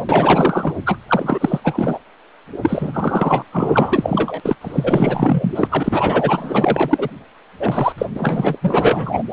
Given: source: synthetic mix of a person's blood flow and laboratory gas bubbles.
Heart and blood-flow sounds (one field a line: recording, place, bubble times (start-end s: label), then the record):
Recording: Doppler ultrasound of blood flow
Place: precordium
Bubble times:
0.09-0.73 s: bubbles
0.86-0.98 s: bubbles
1.08-1.60 s: bubbles
1.63-1.98 s: bubbles
2.62-3.45 s: bubbles
3.52-4.40 s: bubbles
4.43-4.55 s: bubbles
4.61-5.68 s: bubbles
5.71-7.09 s: bubbles
7.59-7.92 s: bubbles
7.98-8.06 s: bubbles
8.15-8.58 s: bubbles
8.61-9.23 s: bubbles
From the record:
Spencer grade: 4 (maximum detectable bubble signal sounding continuously throughout systole and diastole of every cardiac period, and overriding the amplitude of the normal cardiac signals)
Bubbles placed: anywhere in the cardiac cycle